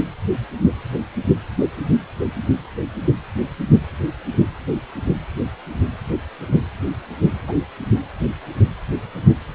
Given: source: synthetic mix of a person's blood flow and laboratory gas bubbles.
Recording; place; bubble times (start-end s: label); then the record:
Doppler ultrasound of blood flow; precordium
7.47-7.53 s: bubbles
From the record:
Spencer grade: 1 (occasional bubble signal discernible with the cardiac motion signal, with majority of cardiac periods free of bubbles); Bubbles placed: anywhere in the cardiac cycle